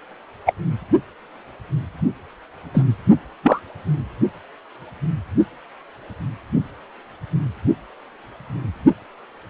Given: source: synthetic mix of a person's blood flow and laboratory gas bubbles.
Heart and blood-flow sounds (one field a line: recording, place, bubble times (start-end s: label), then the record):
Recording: Doppler ultrasound of blood flow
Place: precordium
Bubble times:
0.46-0.53 s: bubbles
2.73-2.83 s: bubbles
3.42-3.59 s: bubbles
From the record:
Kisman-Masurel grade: 123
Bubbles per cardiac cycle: 1 to 2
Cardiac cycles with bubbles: 10 to 50%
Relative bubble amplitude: loud (0.450 to 0.775)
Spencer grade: 2 (many but less than half of the cardiac periods contain bubble signals, singularly or in groups)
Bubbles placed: only in the low amplitude regions of the cardiac cycle